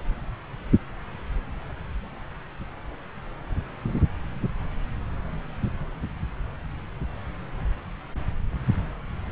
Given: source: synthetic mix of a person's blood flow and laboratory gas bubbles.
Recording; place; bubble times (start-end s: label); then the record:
Doppler ultrasound of blood flow; subclavian vein
no bubbles
From the record:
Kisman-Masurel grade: 000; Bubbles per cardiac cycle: 0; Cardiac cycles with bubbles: 0%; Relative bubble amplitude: no bubbles discernible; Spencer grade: 0 (complete lack of bubble signals)